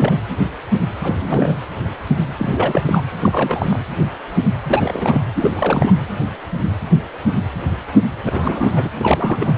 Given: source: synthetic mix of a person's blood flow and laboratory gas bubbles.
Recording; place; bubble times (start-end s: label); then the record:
Doppler ultrasound of blood flow; precordium
0.00-0.18 s: bubbles
1.02-1.55 s: bubbles
2.38-3.01 s: bubbles
3.21-3.77 s: bubbles
4.69-5.22 s: bubbles
5.35-5.51 s: bubbles
5.56-5.96 s: bubbles
8.25-8.90 s: bubbles
8.94-9.54 s: bubbles
From the record:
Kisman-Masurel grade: 332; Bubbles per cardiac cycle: rolling drumbeat, 9 or more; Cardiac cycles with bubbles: 50 to 99%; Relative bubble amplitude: moderate (0.250 to 0.450); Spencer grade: 3 (all of the cardiac periods contain showers or single bubble signals, but not dominating or overriding the cardiac motion signals); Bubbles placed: anywhere in the cardiac cycle